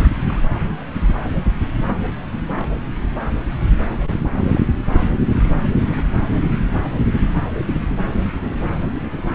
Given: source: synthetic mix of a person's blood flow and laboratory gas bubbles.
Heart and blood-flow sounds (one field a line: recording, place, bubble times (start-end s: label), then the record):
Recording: Doppler ultrasound of blood flow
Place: subclavian vein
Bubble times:
0.00-0.08 s: bubbles
0.26-0.42 s: bubbles
1.15-1.22 s: bubbles
2.57-2.68 s: bubbles
4.06-4.15 s: bubbles
4.50-4.59 s: bubbles
5.88-6.02 s: bubbles
From the record:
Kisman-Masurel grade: 121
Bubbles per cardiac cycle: 1 to 2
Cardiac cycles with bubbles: 10 to 50%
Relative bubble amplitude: barely perceptible (0.100 to 0.250)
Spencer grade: 2 (many but less than half of the cardiac periods contain bubble signals, singularly or in groups)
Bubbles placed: anywhere in the cardiac cycle